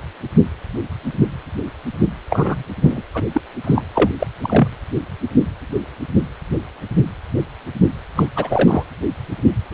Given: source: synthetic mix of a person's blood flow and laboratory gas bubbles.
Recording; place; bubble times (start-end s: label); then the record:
Doppler ultrasound of blood flow; precordium
2.29-2.63 s: bubbles
2.81-3.03 s: bubbles
3.14-3.23 s: bubbles
3.34-3.41 s: bubbles
3.64-3.82 s: bubbles
3.94-4.10 s: bubbles
4.19-4.27 s: bubbles
4.42-4.68 s: bubbles
8.16-8.27 s: bubbles
8.35-8.83 s: bubbles
9.71-9.74 s: bubbles
From the record:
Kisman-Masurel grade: 223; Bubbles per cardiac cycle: several, 3 to 8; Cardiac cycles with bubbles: 10 to 50%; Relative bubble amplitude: loud (0.450 to 0.775); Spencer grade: 2 (many but less than half of the cardiac periods contain bubble signals, singularly or in groups); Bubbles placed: anywhere in the cardiac cycle